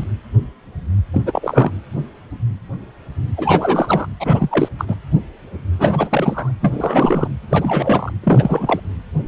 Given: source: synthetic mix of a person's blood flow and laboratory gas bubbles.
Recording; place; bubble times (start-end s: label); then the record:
Doppler ultrasound of blood flow; precordium
0.00-0.04 s: bubbles
1.13-1.22 s: bubbles
1.25-1.71 s: bubbles
3.37-4.07 s: bubbles
4.20-4.69 s: bubbles
4.78-4.84 s: bubbles
4.88-4.95 s: bubbles
5.79-6.53 s: bubbles
6.60-7.28 s: bubbles
7.49-8.12 s: bubbles
8.23-8.80 s: bubbles
From the record:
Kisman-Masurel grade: 333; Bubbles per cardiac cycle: rolling drumbeat, 9 or more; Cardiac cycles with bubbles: 50 to 99%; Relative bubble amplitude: loud (0.450 to 0.775); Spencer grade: 3 (all of the cardiac periods contain showers or single bubble signals, but not dominating or overriding the cardiac motion signals); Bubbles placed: anywhere in the cardiac cycle